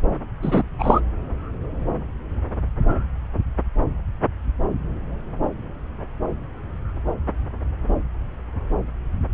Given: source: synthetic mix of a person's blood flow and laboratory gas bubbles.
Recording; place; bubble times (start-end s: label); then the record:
Doppler ultrasound of blood flow; subclavian vein
0.41-0.63 s: bubbles
0.78-1.00 s: bubbles
From the record:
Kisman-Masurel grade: 223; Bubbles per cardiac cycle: several, 3 to 8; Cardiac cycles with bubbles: 10 to 50%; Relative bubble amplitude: loud (0.450 to 0.775); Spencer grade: 2 (many but less than half of the cardiac periods contain bubble signals, singularly or in groups); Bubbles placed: anywhere in the cardiac cycle